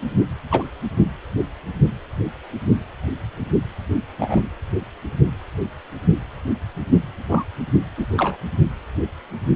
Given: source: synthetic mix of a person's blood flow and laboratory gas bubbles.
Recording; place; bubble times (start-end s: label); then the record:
Doppler ultrasound of blood flow; precordium
0.51-0.63 s: bubbles
4.19-4.48 s: bubbles
7.28-7.44 s: bubbles
7.98-8.05 s: bubbles
8.17-8.37 s: bubbles
From the record:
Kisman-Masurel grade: 122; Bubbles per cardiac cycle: 1 to 2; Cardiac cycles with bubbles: 10 to 50%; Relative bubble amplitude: moderate (0.250 to 0.450); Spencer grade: 2 (many but less than half of the cardiac periods contain bubble signals, singularly or in groups); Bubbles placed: anywhere in the cardiac cycle